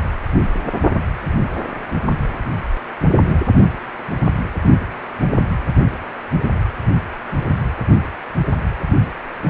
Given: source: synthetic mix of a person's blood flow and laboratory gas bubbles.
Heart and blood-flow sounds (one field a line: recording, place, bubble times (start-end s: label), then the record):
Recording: Doppler ultrasound of blood flow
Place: precordium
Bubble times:
3.02-3.08 s: bubbles
3.11-3.42 s: bubbles
From the record:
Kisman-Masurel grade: 111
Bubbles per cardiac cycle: 1 to 2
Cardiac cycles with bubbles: 1 to 10%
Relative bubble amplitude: barely perceptible (0.100 to 0.250)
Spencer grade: 1 (occasional bubble signal discernible with the cardiac motion signal, with majority of cardiac periods free of bubbles)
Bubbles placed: anywhere in the cardiac cycle